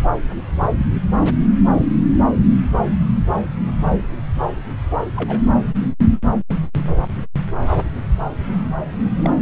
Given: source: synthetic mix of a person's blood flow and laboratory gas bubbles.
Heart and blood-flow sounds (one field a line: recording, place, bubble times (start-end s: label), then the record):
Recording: Doppler ultrasound of blood flow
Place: subclavian vein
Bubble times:
5.15-5.41 s: bubbles
9.17-9.33 s: bubbles
From the record:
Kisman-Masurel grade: 111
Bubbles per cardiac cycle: 1 to 2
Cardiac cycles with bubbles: 1 to 10%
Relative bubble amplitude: barely perceptible (0.100 to 0.250)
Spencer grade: 1 (occasional bubble signal discernible with the cardiac motion signal, with majority of cardiac periods free of bubbles)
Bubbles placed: anywhere in the cardiac cycle